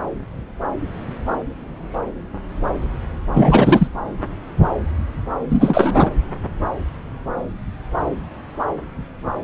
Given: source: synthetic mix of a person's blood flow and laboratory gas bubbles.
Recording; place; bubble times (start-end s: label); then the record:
Doppler ultrasound of blood flow; subclavian vein
3.34-3.88 s: bubbles
5.49-6.11 s: bubbles
From the record:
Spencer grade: 1 (occasional bubble signal discernible with the cardiac motion signal, with majority of cardiac periods free of bubbles); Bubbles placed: anywhere in the cardiac cycle